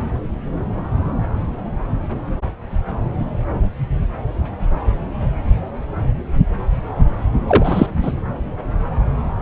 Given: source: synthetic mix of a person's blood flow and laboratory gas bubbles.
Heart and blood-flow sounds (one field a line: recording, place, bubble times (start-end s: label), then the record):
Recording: Doppler ultrasound of blood flow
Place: subclavian vein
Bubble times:
7.47-7.87 s: bubbles
8.02-8.12 s: bubbles
From the record:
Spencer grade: 1 (occasional bubble signal discernible with the cardiac motion signal, with majority of cardiac periods free of bubbles)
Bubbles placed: anywhere in the cardiac cycle